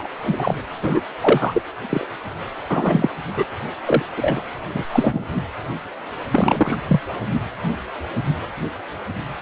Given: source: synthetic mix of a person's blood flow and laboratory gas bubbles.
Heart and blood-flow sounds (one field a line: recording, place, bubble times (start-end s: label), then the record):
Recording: Doppler ultrasound of blood flow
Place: precordium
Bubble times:
0.00-0.08 s: bubbles
0.23-0.52 s: bubbles
0.82-1.00 s: bubbles
1.21-1.61 s: bubbles
1.90-2.06 s: bubbles
2.69-3.08 s: bubbles
3.36-3.45 s: bubbles
3.85-4.03 s: bubbles
4.17-4.43 s: bubbles
4.74-4.83 s: bubbles
4.92-5.29 s: bubbles
6.30-6.78 s: bubbles
6.88-7.00 s: bubbles
From the record:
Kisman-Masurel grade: 233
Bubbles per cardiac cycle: several, 3 to 8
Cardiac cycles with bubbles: 50 to 99%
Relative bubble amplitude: loud (0.450 to 0.775)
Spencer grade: 3 (all of the cardiac periods contain showers or single bubble signals, but not dominating or overriding the cardiac motion signals)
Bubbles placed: anywhere in the cardiac cycle